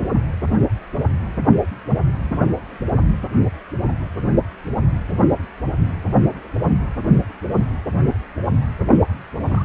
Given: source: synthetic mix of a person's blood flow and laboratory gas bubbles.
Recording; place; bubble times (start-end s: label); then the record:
Doppler ultrasound of blood flow; precordium
8.89-8.94 s: bubbles
9.32-9.64 s: bubbles
From the record:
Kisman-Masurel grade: 211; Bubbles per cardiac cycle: several, 3 to 8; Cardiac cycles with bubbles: 1 to 10%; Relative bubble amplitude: barely perceptible (0.100 to 0.250); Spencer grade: 1 (occasional bubble signal discernible with the cardiac motion signal, with majority of cardiac periods free of bubbles); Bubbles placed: anywhere in the cardiac cycle